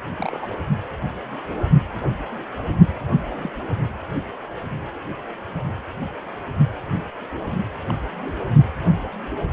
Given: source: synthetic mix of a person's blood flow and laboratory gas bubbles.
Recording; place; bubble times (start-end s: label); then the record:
Doppler ultrasound of blood flow; precordium
0.17-0.57 s: bubbles
3.40-3.50 s: bubbles
7.89-7.93 s: bubbles
8.24-8.33 s: bubbles
From the record:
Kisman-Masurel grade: 121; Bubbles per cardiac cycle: 1 to 2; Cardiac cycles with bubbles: 10 to 50%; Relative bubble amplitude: barely perceptible (0.100 to 0.250); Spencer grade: 2 (many but less than half of the cardiac periods contain bubble signals, singularly or in groups); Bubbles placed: only in the low amplitude regions of the cardiac cycle